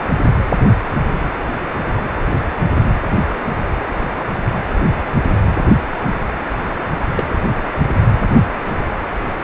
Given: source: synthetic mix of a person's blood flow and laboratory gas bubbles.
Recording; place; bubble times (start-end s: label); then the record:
Doppler ultrasound of blood flow; precordium
7.12-7.26 s: bubbles
From the record:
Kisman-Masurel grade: 113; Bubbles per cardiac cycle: 1 to 2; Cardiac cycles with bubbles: 1 to 10%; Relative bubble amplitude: loud (0.450 to 0.775); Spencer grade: 1 (occasional bubble signal discernible with the cardiac motion signal, with majority of cardiac periods free of bubbles); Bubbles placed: anywhere in the cardiac cycle